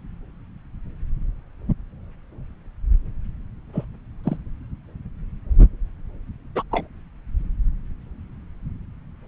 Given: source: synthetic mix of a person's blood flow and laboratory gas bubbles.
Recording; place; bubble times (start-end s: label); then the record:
Doppler ultrasound of blood flow; subclavian vein
3.73-3.85 s: bubbles
4.23-4.37 s: bubbles
6.55-6.62 s: bubbles
6.71-6.87 s: bubbles
From the record:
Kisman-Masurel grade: 122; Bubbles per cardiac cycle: 1 to 2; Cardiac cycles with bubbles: 10 to 50%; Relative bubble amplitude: moderate (0.250 to 0.450); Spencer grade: 2 (many but less than half of the cardiac periods contain bubble signals, singularly or in groups); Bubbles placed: anywhere in the cardiac cycle